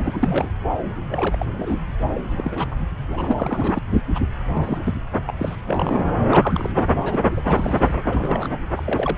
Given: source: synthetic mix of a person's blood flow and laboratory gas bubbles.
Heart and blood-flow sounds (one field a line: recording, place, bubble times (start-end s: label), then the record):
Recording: Doppler ultrasound of blood flow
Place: subclavian vein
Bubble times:
0.00-0.19 s: bubbles
0.23-0.49 s: bubbles
1.09-1.37 s: bubbles
1.41-1.78 s: bubbles
2.14-2.21 s: bubbles
2.31-2.75 s: bubbles
3.07-3.79 s: bubbles
3.91-4.01 s: bubbles
4.07-4.19 s: bubbles
4.49-5.00 s: bubbles
5.25-5.55 s: bubbles
5.67-6.01 s: bubbles
6.27-6.70 s: bubbles
6.89-7.21 s: bubbles
7.30-7.41 s: bubbles
7.47-7.95 s: bubbles
8.03-8.48 s: bubbles
8.77-8.83 s: bubbles
8.86-9.16 s: bubbles
From the record:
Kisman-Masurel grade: 242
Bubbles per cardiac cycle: several, 3 to 8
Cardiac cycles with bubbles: 100%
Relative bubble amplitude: moderate (0.250 to 0.450)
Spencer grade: 3 (all of the cardiac periods contain showers or single bubble signals, but not dominating or overriding the cardiac motion signals)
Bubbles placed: anywhere in the cardiac cycle